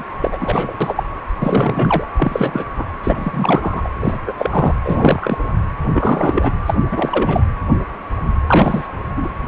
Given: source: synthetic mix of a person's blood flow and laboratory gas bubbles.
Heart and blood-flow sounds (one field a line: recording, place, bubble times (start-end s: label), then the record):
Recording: Doppler ultrasound of blood flow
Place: precordium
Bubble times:
0.00-0.04 s: bubbles
0.22-0.73 s: bubbles
0.81-1.03 s: bubbles
1.40-2.07 s: bubbles
2.16-2.65 s: bubbles
2.77-2.85 s: bubbles
3.04-3.89 s: bubbles
4.00-4.18 s: bubbles
4.26-4.35 s: bubbles
4.38-4.75 s: bubbles
4.84-5.38 s: bubbles
5.92-6.50 s: bubbles
6.66-6.74 s: bubbles
6.92-7.46 s: bubbles
8.46-8.88 s: bubbles
9.16-9.28 s: bubbles
From the record:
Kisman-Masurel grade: 333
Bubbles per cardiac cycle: rolling drumbeat, 9 or more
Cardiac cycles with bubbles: 50 to 99%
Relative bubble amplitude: loud (0.450 to 0.775)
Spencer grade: 3 (all of the cardiac periods contain showers or single bubble signals, but not dominating or overriding the cardiac motion signals)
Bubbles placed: anywhere in the cardiac cycle